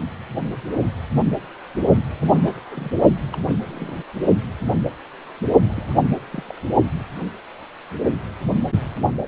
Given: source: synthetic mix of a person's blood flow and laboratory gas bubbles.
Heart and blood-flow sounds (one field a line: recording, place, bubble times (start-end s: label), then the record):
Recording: Doppler ultrasound of blood flow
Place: precordium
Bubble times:
2.21-2.62 s: bubbles
2.65-2.91 s: bubbles
3.33-3.37 s: bubbles
3.46-3.95 s: bubbles
5.64-6.00 s: bubbles
6.31-6.43 s: bubbles
6.48-6.51 s: bubbles
From the record:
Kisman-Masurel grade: 221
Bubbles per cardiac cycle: several, 3 to 8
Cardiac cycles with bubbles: 10 to 50%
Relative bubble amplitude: barely perceptible (0.100 to 0.250)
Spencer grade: 2 (many but less than half of the cardiac periods contain bubble signals, singularly or in groups)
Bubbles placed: only in the low amplitude regions of the cardiac cycle